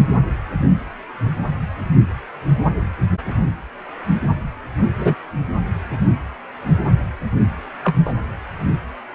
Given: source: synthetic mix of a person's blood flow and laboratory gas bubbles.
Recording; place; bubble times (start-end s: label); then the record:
Doppler ultrasound of blood flow; precordium
4.98-5.15 s: bubbles
7.84-7.95 s: bubbles
8.05-8.13 s: bubbles
From the record:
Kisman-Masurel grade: 123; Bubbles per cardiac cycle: 1 to 2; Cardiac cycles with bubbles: 10 to 50%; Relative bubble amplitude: loud (0.450 to 0.775); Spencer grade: 2 (many but less than half of the cardiac periods contain bubble signals, singularly or in groups); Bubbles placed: anywhere in the cardiac cycle